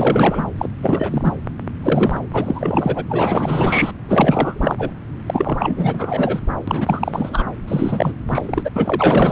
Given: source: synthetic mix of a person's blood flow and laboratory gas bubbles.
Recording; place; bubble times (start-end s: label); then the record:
Doppler ultrasound of blood flow; subclavian vein
0.00-0.45 s: bubbles
0.57-0.69 s: bubbles
0.81-1.36 s: bubbles
1.83-2.19 s: bubbles
2.33-3.04 s: bubbles
3.09-3.92 s: bubbles
4.08-4.91 s: bubbles
5.26-6.41 s: bubbles
6.68-7.46 s: bubbles
7.68-8.13 s: bubbles
8.29-8.71 s: bubbles
8.76-9.32 s: bubbles
From the record:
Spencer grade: 4 (maximum detectable bubble signal sounding continuously throughout systole and diastole of every cardiac period, and overriding the amplitude of the normal cardiac signals); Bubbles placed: anywhere in the cardiac cycle